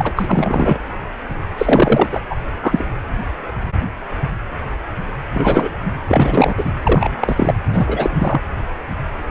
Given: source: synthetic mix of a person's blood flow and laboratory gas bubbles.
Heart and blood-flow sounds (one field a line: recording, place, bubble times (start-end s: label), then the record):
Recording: Doppler ultrasound of blood flow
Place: precordium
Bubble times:
0.00-0.14 s: bubbles
0.16-0.79 s: bubbles
1.58-2.08 s: bubbles
2.11-2.20 s: bubbles
2.29-2.35 s: bubbles
2.62-2.87 s: bubbles
5.33-5.70 s: bubbles
6.07-6.72 s: bubbles
6.83-7.54 s: bubbles
7.72-8.41 s: bubbles
From the record:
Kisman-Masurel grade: 233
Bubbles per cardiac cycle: several, 3 to 8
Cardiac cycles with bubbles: 50 to 99%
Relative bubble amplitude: loud (0.450 to 0.775)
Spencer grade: 3 (all of the cardiac periods contain showers or single bubble signals, but not dominating or overriding the cardiac motion signals)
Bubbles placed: anywhere in the cardiac cycle